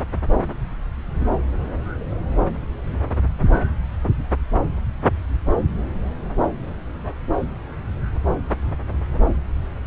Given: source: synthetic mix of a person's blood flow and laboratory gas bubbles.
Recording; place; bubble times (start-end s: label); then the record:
Doppler ultrasound of blood flow; subclavian vein
no bubbles
From the record:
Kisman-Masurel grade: 000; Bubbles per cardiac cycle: 0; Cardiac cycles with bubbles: 0%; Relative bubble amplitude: no bubbles discernible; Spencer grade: 0 (complete lack of bubble signals)